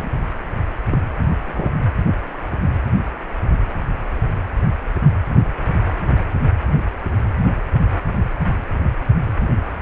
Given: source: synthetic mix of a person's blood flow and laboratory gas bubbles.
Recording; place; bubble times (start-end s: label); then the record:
Doppler ultrasound of blood flow; precordium
0.00-0.09 s: bubbles
0.86-0.99 s: bubbles
1.46-1.74 s: bubbles
From the record:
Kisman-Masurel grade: 122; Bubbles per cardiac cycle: 1 to 2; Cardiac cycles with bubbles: 10 to 50%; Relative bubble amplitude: moderate (0.250 to 0.450); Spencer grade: 2 (many but less than half of the cardiac periods contain bubble signals, singularly or in groups); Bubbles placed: anywhere in the cardiac cycle